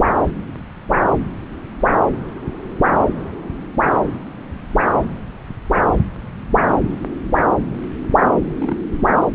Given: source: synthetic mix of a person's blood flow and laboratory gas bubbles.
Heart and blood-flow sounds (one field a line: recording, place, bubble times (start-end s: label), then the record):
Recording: Doppler ultrasound of blood flow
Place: subclavian vein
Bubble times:
8.58-8.76 s: bubbles
9.17-9.26 s: bubbles
From the record:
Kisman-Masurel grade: 111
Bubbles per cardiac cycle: 1 to 2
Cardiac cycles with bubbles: 1 to 10%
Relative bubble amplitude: barely perceptible (0.100 to 0.250)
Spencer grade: 1 (occasional bubble signal discernible with the cardiac motion signal, with majority of cardiac periods free of bubbles)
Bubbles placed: anywhere in the cardiac cycle